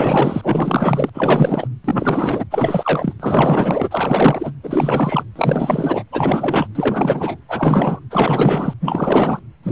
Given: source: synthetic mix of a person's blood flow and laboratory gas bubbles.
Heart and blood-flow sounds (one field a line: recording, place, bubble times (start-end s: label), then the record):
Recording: Doppler ultrasound of blood flow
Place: precordium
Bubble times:
0.00-1.09 s: bubbles
1.14-1.68 s: bubbles
1.84-2.44 s: bubbles
2.50-3.13 s: bubbles
3.19-4.52 s: bubbles
4.63-5.24 s: bubbles
5.36-6.04 s: bubbles
6.12-6.67 s: bubbles
6.75-7.37 s: bubbles
7.48-8.00 s: bubbles
8.11-8.74 s: bubbles
8.80-9.39 s: bubbles
9.63-9.72 s: bubbles
From the record:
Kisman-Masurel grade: 444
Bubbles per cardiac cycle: continuous sound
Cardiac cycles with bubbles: 100%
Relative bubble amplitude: maximal (0.775 to 0.999)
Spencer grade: 4 (maximum detectable bubble signal sounding continuously throughout systole and diastole of every cardiac period, and overriding the amplitude of the normal cardiac signals)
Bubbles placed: anywhere in the cardiac cycle